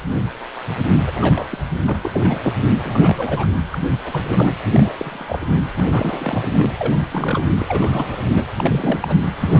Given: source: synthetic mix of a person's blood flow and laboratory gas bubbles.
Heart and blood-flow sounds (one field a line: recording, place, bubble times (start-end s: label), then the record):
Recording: Doppler ultrasound of blood flow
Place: precordium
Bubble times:
1.06-1.12 s: bubbles
1.15-1.58 s: bubbles
1.87-1.96 s: bubbles
2.02-2.52 s: bubbles
2.83-3.46 s: bubbles
3.71-3.78 s: bubbles
4.03-4.53 s: bubbles
4.73-4.92 s: bubbles
4.96-5.45 s: bubbles
5.50-5.63 s: bubbles
5.74-6.48 s: bubbles
6.54-6.66 s: bubbles
6.79-6.94 s: bubbles
7.11-7.48 s: bubbles
7.59-8.29 s: bubbles
8.34-8.45 s: bubbles
8.56-9.17 s: bubbles
9.41-9.60 s: bubbles
From the record:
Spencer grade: 3 (all of the cardiac periods contain showers or single bubble signals, but not dominating or overriding the cardiac motion signals)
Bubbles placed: anywhere in the cardiac cycle